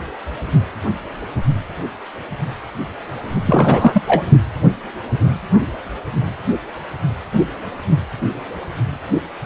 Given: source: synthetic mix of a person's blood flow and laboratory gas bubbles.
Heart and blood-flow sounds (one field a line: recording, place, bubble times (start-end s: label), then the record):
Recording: Doppler ultrasound of blood flow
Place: precordium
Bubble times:
3.46-4.02 s: bubbles
4.06-4.23 s: bubbles
From the record:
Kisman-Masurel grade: 213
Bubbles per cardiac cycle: several, 3 to 8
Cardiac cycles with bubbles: 1 to 10%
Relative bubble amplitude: loud (0.450 to 0.775)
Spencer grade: 1 (occasional bubble signal discernible with the cardiac motion signal, with majority of cardiac periods free of bubbles)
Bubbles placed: only in the low amplitude regions of the cardiac cycle